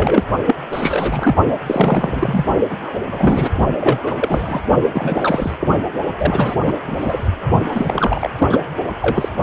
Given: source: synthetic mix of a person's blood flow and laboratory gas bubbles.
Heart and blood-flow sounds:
Doppler ultrasound of blood flow; precordium
0.00-0.24 s: bubbles
0.46-0.57 s: bubbles
0.71-1.37 s: bubbles
1.67-2.46 s: bubbles
2.69-2.77 s: bubbles
3.12-3.50 s: bubbles
3.79-4.61 s: bubbles
4.86-5.56 s: bubbles
5.60-5.67 s: bubbles
6.17-6.56 s: bubbles
6.64-6.74 s: bubbles
6.87-7.28 s: bubbles
7.72-8.30 s: bubbles
8.38-8.58 s: bubbles
9.00-9.29 s: bubbles
From the record:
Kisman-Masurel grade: 333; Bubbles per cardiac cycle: rolling drumbeat, 9 or more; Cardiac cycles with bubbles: 50 to 99%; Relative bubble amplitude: loud (0.450 to 0.775); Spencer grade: 3 (all of the cardiac periods contain showers or single bubble signals, but not dominating or overriding the cardiac motion signals); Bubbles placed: only in the low amplitude regions of the cardiac cycle

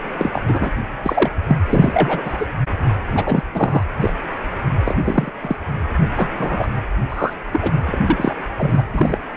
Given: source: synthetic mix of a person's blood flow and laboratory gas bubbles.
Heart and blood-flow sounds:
Doppler ultrasound of blood flow; precordium
0.18-0.42 s: bubbles
0.47-0.72 s: bubbles
1.02-1.30 s: bubbles
1.48-1.57 s: bubbles
1.69-2.46 s: bubbles
3.15-3.42 s: bubbles
3.53-3.83 s: bubbles
4.00-4.13 s: bubbles
4.84-4.97 s: bubbles
5.04-5.30 s: bubbles
5.42-5.56 s: bubbles
6.16-6.31 s: bubbles
6.38-6.68 s: bubbles
7.09-7.33 s: bubbles
7.51-7.72 s: bubbles
7.86-8.04 s: bubbles
8.07-8.35 s: bubbles
8.58-8.83 s: bubbles
8.94-9.18 s: bubbles
From the record:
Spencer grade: 3 (all of the cardiac periods contain showers or single bubble signals, but not dominating or overriding the cardiac motion signals); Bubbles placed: anywhere in the cardiac cycle

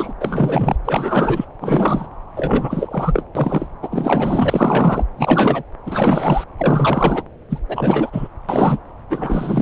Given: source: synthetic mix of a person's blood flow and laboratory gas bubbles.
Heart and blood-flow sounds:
Doppler ultrasound of blood flow; subclavian vein
0.00-0.13 s: bubbles
0.20-0.76 s: bubbles
0.85-1.45 s: bubbles
1.60-2.07 s: bubbles
2.35-3.25 s: bubbles
3.35-3.67 s: bubbles
3.82-5.04 s: bubbles
5.17-5.63 s: bubbles
5.86-6.44 s: bubbles
6.58-7.22 s: bubbles
7.50-7.60 s: bubbles
7.68-8.28 s: bubbles
8.48-8.79 s: bubbles
9.09-9.62 s: bubbles
From the record:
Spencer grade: 4 (maximum detectable bubble signal sounding continuously throughout systole and diastole of every cardiac period, and overriding the amplitude of the normal cardiac signals); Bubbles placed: anywhere in the cardiac cycle

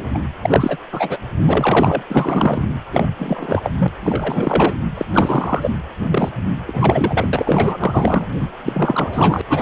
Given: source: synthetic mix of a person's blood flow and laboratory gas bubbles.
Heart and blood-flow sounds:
Doppler ultrasound of blood flow; precordium
0.00-0.20 s: bubbles
0.41-0.78 s: bubbles
0.92-1.17 s: bubbles
1.42-2.02 s: bubbles
2.10-2.67 s: bubbles
2.93-3.07 s: bubbles
3.19-3.60 s: bubbles
3.63-3.71 s: bubbles
3.78-3.88 s: bubbles
4.03-4.74 s: bubbles
4.97-5.05 s: bubbles
5.12-5.71 s: bubbles
6.09-6.29 s: bubbles
6.67-7.30 s: bubbles
7.33-8.27 s: bubbles
8.58-9.41 s: bubbles
9.49-9.62 s: bubbles
From the record:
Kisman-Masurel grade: 343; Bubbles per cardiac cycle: rolling drumbeat, 9 or more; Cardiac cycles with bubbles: 100%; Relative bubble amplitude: loud (0.450 to 0.775); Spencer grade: 3 (all of the cardiac periods contain showers or single bubble signals, but not dominating or overriding the cardiac motion signals); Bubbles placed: anywhere in the cardiac cycle

